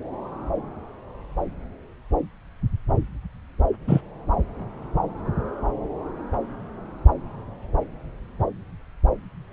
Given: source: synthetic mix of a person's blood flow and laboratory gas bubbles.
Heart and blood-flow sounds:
Doppler ultrasound of blood flow; subclavian vein
3.88-4.01 s: bubbles
From the record:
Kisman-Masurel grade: 112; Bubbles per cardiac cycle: 1 to 2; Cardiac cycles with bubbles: 1 to 10%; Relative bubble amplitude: moderate (0.250 to 0.450); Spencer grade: 1 (occasional bubble signal discernible with the cardiac motion signal, with majority of cardiac periods free of bubbles); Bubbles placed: anywhere in the cardiac cycle

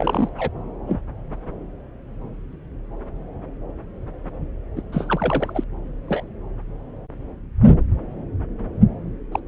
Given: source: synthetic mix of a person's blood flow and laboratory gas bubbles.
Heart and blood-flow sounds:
Doppler ultrasound of blood flow; subclavian vein
0.00-0.29 s: bubbles
0.38-0.49 s: bubbles
0.87-1.01 s: bubbles
4.76-4.82 s: bubbles
4.92-5.64 s: bubbles
6.08-6.24 s: bubbles
9.32-9.40 s: bubbles
From the record:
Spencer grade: 2 (many but less than half of the cardiac periods contain bubble signals, singularly or in groups); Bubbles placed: anywhere in the cardiac cycle

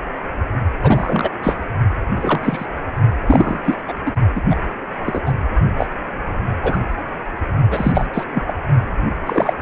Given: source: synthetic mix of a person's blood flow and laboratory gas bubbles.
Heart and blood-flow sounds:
Doppler ultrasound of blood flow; precordium
0.82-1.31 s: bubbles
1.43-1.56 s: bubbles
2.15-2.41 s: bubbles
2.43-2.66 s: bubbles
3.26-3.75 s: bubbles
3.88-3.94 s: bubbles
4.05-4.12 s: bubbles
4.34-4.42 s: bubbles
4.49-4.56 s: bubbles
5.05-5.22 s: bubbles
5.25-5.32 s: bubbles
5.77-5.86 s: bubbles
6.62-6.78 s: bubbles
7.70-8.07 s: bubbles
8.13-8.24 s: bubbles
8.34-8.43 s: bubbles
8.47-8.54 s: bubbles
9.26-9.54 s: bubbles
From the record:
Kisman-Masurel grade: 233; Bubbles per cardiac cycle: several, 3 to 8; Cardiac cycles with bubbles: 50 to 99%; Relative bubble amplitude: loud (0.450 to 0.775); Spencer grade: 3 (all of the cardiac periods contain showers or single bubble signals, but not dominating or overriding the cardiac motion signals); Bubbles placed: only in the low amplitude regions of the cardiac cycle

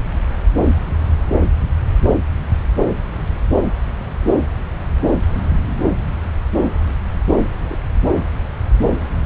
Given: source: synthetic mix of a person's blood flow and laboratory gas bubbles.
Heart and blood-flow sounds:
Doppler ultrasound of blood flow; subclavian vein
7.68-7.78 s: bubbles
From the record:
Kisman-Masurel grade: 121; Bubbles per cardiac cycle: 1 to 2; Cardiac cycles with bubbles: 10 to 50%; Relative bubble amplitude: barely perceptible (0.100 to 0.250); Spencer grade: 2 (many but less than half of the cardiac periods contain bubble signals, singularly or in groups); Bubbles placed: anywhere in the cardiac cycle

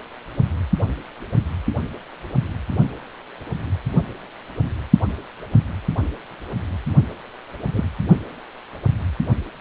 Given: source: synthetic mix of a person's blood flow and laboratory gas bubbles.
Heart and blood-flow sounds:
Doppler ultrasound of blood flow; precordium
7.73-7.85 s: bubbles
From the record:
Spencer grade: 1 (occasional bubble signal discernible with the cardiac motion signal, with majority of cardiac periods free of bubbles); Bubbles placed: only in the low amplitude regions of the cardiac cycle

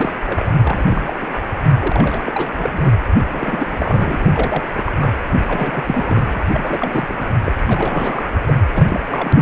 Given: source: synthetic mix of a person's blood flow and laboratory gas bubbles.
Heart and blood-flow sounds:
Doppler ultrasound of blood flow; precordium
0.00-0.11 s: bubbles
0.26-0.51 s: bubbles
0.61-1.14 s: bubbles
1.22-1.26 s: bubbles
1.34-1.40 s: bubbles
1.80-2.50 s: bubbles
2.57-2.92 s: bubbles
3.23-4.16 s: bubbles
4.19-4.63 s: bubbles
4.75-4.92 s: bubbles
5.00-5.12 s: bubbles
5.47-5.84 s: bubbles
5.87-6.38 s: bubbles
6.53-7.34 s: bubbles
7.45-7.54 s: bubbles
7.67-8.30 s: bubbles
8.46-8.54 s: bubbles
8.73-9.00 s: bubbles
9.08-9.41 s: bubbles
From the record:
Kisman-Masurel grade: 342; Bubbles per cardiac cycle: rolling drumbeat, 9 or more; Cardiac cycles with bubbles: 100%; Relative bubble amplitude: moderate (0.250 to 0.450); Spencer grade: 3 (all of the cardiac periods contain showers or single bubble signals, but not dominating or overriding the cardiac motion signals); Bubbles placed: anywhere in the cardiac cycle

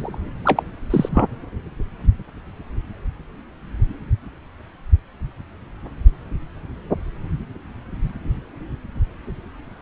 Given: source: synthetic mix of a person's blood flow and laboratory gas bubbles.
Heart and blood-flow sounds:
Doppler ultrasound of blood flow; subclavian vein
0.00-0.18 s: bubbles
0.45-0.63 s: bubbles
0.90-1.26 s: bubbles
From the record:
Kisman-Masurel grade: 222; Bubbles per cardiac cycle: several, 3 to 8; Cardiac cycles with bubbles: 10 to 50%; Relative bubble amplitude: moderate (0.250 to 0.450); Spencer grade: 2 (many but less than half of the cardiac periods contain bubble signals, singularly or in groups); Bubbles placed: anywhere in the cardiac cycle

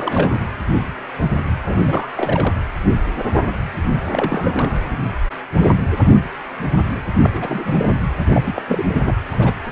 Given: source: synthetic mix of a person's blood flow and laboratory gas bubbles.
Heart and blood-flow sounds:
Doppler ultrasound of blood flow; precordium
0.00-0.43 s: bubbles
1.67-2.11 s: bubbles
2.17-2.55 s: bubbles
4.06-4.98 s: bubbles
7.21-7.30 s: bubbles
7.34-7.93 s: bubbles
8.28-8.62 s: bubbles
8.68-8.85 s: bubbles
8.88-9.14 s: bubbles
9.32-9.52 s: bubbles
9.64-9.72 s: bubbles
From the record:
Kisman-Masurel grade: 332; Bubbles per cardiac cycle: rolling drumbeat, 9 or more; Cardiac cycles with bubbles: 50 to 99%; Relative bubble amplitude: moderate (0.250 to 0.450); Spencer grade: 3 (all of the cardiac periods contain showers or single bubble signals, but not dominating or overriding the cardiac motion signals); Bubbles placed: anywhere in the cardiac cycle

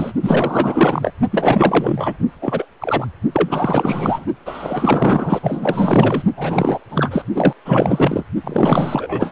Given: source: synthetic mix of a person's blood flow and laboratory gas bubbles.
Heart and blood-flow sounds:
Doppler ultrasound of blood flow; precordium
0.00-0.12 s: bubbles
0.22-1.12 s: bubbles
1.31-2.14 s: bubbles
2.42-2.66 s: bubbles
2.81-3.06 s: bubbles
3.32-4.25 s: bubbles
4.46-6.22 s: bubbles
6.36-6.79 s: bubbles
6.90-7.22 s: bubbles
7.34-7.53 s: bubbles
7.65-8.24 s: bubbles
8.44-9.32 s: bubbles
From the record:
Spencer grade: 4 (maximum detectable bubble signal sounding continuously throughout systole and diastole of every cardiac period, and overriding the amplitude of the normal cardiac signals); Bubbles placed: only in the low amplitude regions of the cardiac cycle

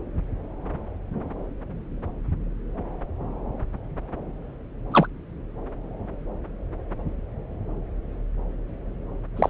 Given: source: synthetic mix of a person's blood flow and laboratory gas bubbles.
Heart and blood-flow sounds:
Doppler ultrasound of blood flow; subclavian vein
4.92-5.07 s: bubbles
9.37-9.50 s: bubbles
From the record:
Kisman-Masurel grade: 122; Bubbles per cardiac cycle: 1 to 2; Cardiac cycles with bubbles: 10 to 50%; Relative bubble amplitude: moderate (0.250 to 0.450); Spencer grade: 2 (many but less than half of the cardiac periods contain bubble signals, singularly or in groups); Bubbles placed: anywhere in the cardiac cycle

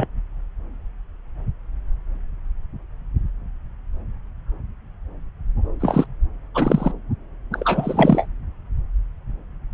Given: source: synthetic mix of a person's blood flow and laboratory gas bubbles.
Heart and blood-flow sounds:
Doppler ultrasound of blood flow; subclavian vein
0.00-0.07 s: bubbles
5.80-6.06 s: bubbles
6.54-6.92 s: bubbles
7.51-8.26 s: bubbles
From the record:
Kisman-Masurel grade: 223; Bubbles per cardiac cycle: several, 3 to 8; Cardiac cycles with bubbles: 10 to 50%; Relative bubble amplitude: loud (0.450 to 0.775); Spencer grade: 2 (many but less than half of the cardiac periods contain bubble signals, singularly or in groups); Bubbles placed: anywhere in the cardiac cycle

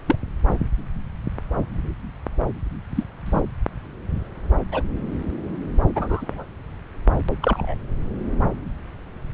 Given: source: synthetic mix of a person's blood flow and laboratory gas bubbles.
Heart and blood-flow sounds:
Doppler ultrasound of blood flow; subclavian vein
0.07-0.16 s: bubbles
2.96-3.04 s: bubbles
3.26-3.42 s: bubbles
4.71-4.83 s: bubbles
5.95-6.45 s: bubbles
7.42-7.75 s: bubbles
From the record:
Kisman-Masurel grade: 122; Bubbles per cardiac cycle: 1 to 2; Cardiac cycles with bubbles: 10 to 50%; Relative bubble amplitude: moderate (0.250 to 0.450); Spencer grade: 2 (many but less than half of the cardiac periods contain bubble signals, singularly or in groups); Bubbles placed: anywhere in the cardiac cycle

